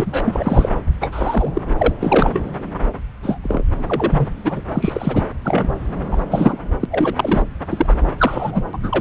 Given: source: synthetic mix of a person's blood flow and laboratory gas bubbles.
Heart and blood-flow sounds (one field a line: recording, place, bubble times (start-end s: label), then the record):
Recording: Doppler ultrasound of blood flow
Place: subclavian vein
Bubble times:
0.00-0.21 s: bubbles
0.23-0.69 s: bubbles
1.01-1.62 s: bubbles
1.77-1.94 s: bubbles
2.00-2.44 s: bubbles
2.73-2.79 s: bubbles
3.23-3.38 s: bubbles
3.43-3.64 s: bubbles
3.87-4.33 s: bubbles
4.43-4.62 s: bubbles
4.72-5.26 s: bubbles
5.44-5.75 s: bubbles
6.11-6.17 s: bubbles
6.29-6.62 s: bubbles
6.79-6.86 s: bubbles
6.91-7.42 s: bubbles
7.70-7.96 s: bubbles
8.18-8.63 s: bubbles
8.73-9.01 s: bubbles
From the record:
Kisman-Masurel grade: 243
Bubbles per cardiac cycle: several, 3 to 8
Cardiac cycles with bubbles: 100%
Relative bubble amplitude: loud (0.450 to 0.775)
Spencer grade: 3 (all of the cardiac periods contain showers or single bubble signals, but not dominating or overriding the cardiac motion signals)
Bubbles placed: anywhere in the cardiac cycle